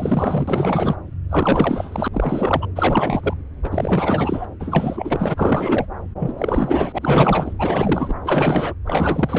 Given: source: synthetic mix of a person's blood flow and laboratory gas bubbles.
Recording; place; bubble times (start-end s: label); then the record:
Doppler ultrasound of blood flow; subclavian vein
0.00-0.95 s: bubbles
1.29-2.08 s: bubbles
2.12-2.67 s: bubbles
2.75-3.33 s: bubbles
3.63-4.46 s: bubbles
4.59-5.87 s: bubbles
6.19-6.33 s: bubbles
6.38-6.99 s: bubbles
7.01-7.53 s: bubbles
7.59-8.14 s: bubbles
8.24-8.73 s: bubbles
8.85-9.39 s: bubbles
From the record:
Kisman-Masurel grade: 444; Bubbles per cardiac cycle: continuous sound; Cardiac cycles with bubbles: 100%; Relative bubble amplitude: maximal (0.775 to 0.999); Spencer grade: 4 (maximum detectable bubble signal sounding continuously throughout systole and diastole of every cardiac period, and overriding the amplitude of the normal cardiac signals); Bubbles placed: anywhere in the cardiac cycle